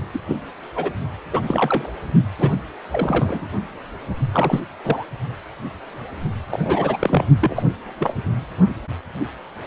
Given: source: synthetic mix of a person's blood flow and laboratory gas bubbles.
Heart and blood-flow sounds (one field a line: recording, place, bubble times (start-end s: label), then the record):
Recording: Doppler ultrasound of blood flow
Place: precordium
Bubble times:
0.13-0.18 s: bubbles
0.29-0.37 s: bubbles
0.76-0.90 s: bubbles
1.33-1.94 s: bubbles
2.38-2.50 s: bubbles
2.92-3.47 s: bubbles
4.32-4.60 s: bubbles
4.84-5.04 s: bubbles
6.51-7.25 s: bubbles
7.41-7.66 s: bubbles
8.00-8.14 s: bubbles
From the record:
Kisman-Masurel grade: 232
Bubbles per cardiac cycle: several, 3 to 8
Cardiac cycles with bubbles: 50 to 99%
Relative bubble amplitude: moderate (0.250 to 0.450)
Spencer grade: 3 (all of the cardiac periods contain showers or single bubble signals, but not dominating or overriding the cardiac motion signals)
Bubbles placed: only in the low amplitude regions of the cardiac cycle